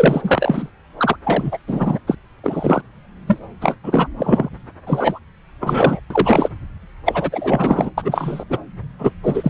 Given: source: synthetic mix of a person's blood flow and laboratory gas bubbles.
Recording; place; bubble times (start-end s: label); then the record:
Doppler ultrasound of blood flow; subclavian vein
0.00-0.69 s: bubbles
0.97-1.16 s: bubbles
1.24-1.57 s: bubbles
1.67-1.99 s: bubbles
2.07-2.17 s: bubbles
2.43-2.82 s: bubbles
3.26-3.39 s: bubbles
3.60-3.77 s: bubbles
3.83-4.08 s: bubbles
4.17-4.49 s: bubbles
4.86-5.19 s: bubbles
5.60-6.00 s: bubbles
6.10-6.48 s: bubbles
7.05-7.90 s: bubbles
7.97-8.44 s: bubbles
8.49-8.58 s: bubbles
8.98-9.12 s: bubbles
9.23-9.50 s: bubbles
From the record:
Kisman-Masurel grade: 333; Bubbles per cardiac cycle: rolling drumbeat, 9 or more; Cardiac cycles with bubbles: 50 to 99%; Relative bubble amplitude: loud (0.450 to 0.775); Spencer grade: 3 (all of the cardiac periods contain showers or single bubble signals, but not dominating or overriding the cardiac motion signals); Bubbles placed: anywhere in the cardiac cycle